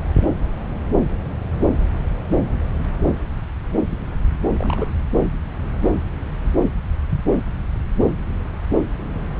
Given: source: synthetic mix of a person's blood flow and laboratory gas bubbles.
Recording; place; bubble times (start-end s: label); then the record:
Doppler ultrasound of blood flow; subclavian vein
4.59-4.94 s: bubbles
From the record:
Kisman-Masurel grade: 211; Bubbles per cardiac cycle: several, 3 to 8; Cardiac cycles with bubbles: 1 to 10%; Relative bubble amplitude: barely perceptible (0.100 to 0.250); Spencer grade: 1 (occasional bubble signal discernible with the cardiac motion signal, with majority of cardiac periods free of bubbles); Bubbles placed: anywhere in the cardiac cycle